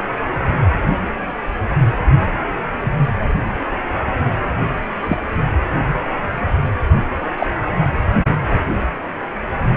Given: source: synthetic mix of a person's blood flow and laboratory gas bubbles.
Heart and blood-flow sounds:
Doppler ultrasound of blood flow; precordium
5.02-5.17 s: bubbles
7.37-7.46 s: bubbles
From the record:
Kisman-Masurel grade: 123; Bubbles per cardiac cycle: 1 to 2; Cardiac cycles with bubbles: 10 to 50%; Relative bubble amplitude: loud (0.450 to 0.775); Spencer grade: 2 (many but less than half of the cardiac periods contain bubble signals, singularly or in groups); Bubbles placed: anywhere in the cardiac cycle

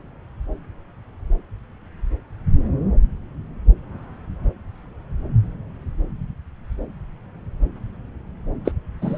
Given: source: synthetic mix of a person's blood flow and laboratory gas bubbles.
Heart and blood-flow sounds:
Doppler ultrasound of blood flow; subclavian vein
8.65-8.71 s: bubbles
9.01-9.18 s: bubbles
From the record:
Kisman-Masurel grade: 212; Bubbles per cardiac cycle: several, 3 to 8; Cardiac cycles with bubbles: 1 to 10%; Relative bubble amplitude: moderate (0.250 to 0.450); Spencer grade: 1 (occasional bubble signal discernible with the cardiac motion signal, with majority of cardiac periods free of bubbles); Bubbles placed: anywhere in the cardiac cycle

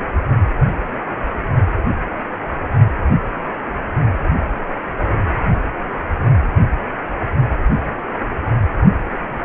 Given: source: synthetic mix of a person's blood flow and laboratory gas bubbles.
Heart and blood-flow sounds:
Doppler ultrasound of blood flow; precordium
no bubbles
From the record:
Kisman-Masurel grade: 000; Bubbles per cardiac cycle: 0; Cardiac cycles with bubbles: 0%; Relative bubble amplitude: no bubbles discernible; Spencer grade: 0 (complete lack of bubble signals)

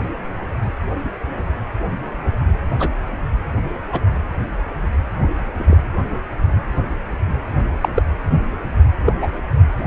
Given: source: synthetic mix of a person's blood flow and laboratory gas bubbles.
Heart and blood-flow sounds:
Doppler ultrasound of blood flow; precordium
2.80-2.90 s: bubbles
3.92-4.00 s: bubbles
5.58-5.76 s: bubbles
7.82-7.89 s: bubbles
7.94-8.03 s: bubbles
9.05-9.13 s: bubbles
9.21-9.28 s: bubbles
From the record:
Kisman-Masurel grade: 123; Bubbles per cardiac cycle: 1 to 2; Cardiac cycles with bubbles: 10 to 50%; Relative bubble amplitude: loud (0.450 to 0.775); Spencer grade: 2 (many but less than half of the cardiac periods contain bubble signals, singularly or in groups); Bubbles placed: anywhere in the cardiac cycle

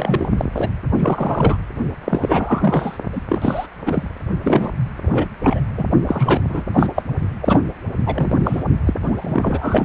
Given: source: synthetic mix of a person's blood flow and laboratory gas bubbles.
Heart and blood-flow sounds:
Doppler ultrasound of blood flow; precordium
0.00-0.29 s: bubbles
0.37-0.45 s: bubbles
0.54-0.69 s: bubbles
0.99-1.57 s: bubbles
2.04-2.98 s: bubbles
3.12-3.21 s: bubbles
3.29-3.66 s: bubbles
3.85-4.08 s: bubbles
4.44-4.70 s: bubbles
5.06-5.29 s: bubbles
5.40-5.61 s: bubbles
5.77-5.85 s: bubbles
6.07-6.41 s: bubbles
6.49-6.64 s: bubbles
6.73-6.87 s: bubbles
6.96-7.02 s: bubbles
7.41-7.61 s: bubbles
8.06-8.42 s: bubbles
8.45-8.63 s: bubbles
8.85-8.93 s: bubbles
9.01-9.85 s: bubbles
From the record:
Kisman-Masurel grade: 343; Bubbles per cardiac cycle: rolling drumbeat, 9 or more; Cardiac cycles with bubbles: 100%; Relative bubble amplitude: loud (0.450 to 0.775); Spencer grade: 3 (all of the cardiac periods contain showers or single bubble signals, but not dominating or overriding the cardiac motion signals); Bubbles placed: only in the low amplitude regions of the cardiac cycle

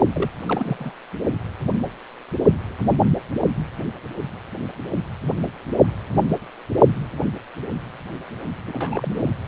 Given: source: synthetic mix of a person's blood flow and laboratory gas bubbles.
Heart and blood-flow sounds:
Doppler ultrasound of blood flow; precordium
0.13-0.31 s: bubbles
0.46-0.94 s: bubbles
8.67-9.30 s: bubbles
From the record:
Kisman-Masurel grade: 221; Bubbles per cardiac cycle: several, 3 to 8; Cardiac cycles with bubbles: 10 to 50%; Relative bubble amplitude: barely perceptible (0.100 to 0.250); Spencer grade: 2 (many but less than half of the cardiac periods contain bubble signals, singularly or in groups); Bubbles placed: only in the low amplitude regions of the cardiac cycle

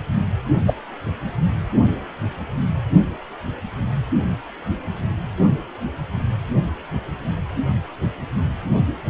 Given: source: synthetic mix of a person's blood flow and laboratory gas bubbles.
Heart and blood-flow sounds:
Doppler ultrasound of blood flow; precordium
0.66-0.73 s: bubbles
From the record:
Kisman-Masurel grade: 113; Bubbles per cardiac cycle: 1 to 2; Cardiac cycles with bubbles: 1 to 10%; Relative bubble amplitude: loud (0.450 to 0.775); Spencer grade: 1 (occasional bubble signal discernible with the cardiac motion signal, with majority of cardiac periods free of bubbles); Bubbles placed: only in the low amplitude regions of the cardiac cycle

